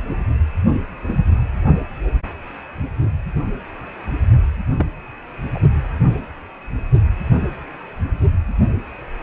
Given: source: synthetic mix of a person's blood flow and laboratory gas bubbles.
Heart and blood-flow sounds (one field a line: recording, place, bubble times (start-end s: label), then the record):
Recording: Doppler ultrasound of blood flow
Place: precordium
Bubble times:
4.78-4.87 s: bubbles
5.54-5.59 s: bubbles
From the record:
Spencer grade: 1 (occasional bubble signal discernible with the cardiac motion signal, with majority of cardiac periods free of bubbles)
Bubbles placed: anywhere in the cardiac cycle